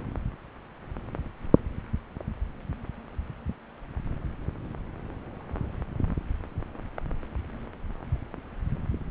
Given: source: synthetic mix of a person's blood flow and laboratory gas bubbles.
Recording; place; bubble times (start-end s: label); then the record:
Doppler ultrasound of blood flow; subclavian vein
no bubbles
From the record:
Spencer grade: 0 (complete lack of bubble signals)